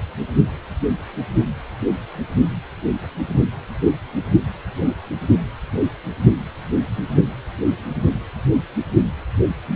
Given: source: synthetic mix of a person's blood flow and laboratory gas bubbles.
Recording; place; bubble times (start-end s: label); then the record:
Doppler ultrasound of blood flow; precordium
no bubbles
From the record:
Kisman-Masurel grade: 000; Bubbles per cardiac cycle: 0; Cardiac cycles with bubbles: 0%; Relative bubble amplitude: no bubbles discernible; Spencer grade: 0 (complete lack of bubble signals)